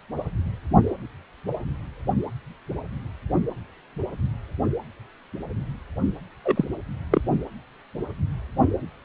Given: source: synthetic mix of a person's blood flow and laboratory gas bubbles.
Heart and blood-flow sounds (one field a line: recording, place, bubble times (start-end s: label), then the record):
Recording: Doppler ultrasound of blood flow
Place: precordium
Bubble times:
6.44-6.65 s: bubbles
7.11-7.21 s: bubbles
From the record:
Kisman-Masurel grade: 212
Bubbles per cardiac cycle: several, 3 to 8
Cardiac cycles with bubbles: 1 to 10%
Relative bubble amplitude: moderate (0.250 to 0.450)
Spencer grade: 1 (occasional bubble signal discernible with the cardiac motion signal, with majority of cardiac periods free of bubbles)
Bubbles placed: only in the low amplitude regions of the cardiac cycle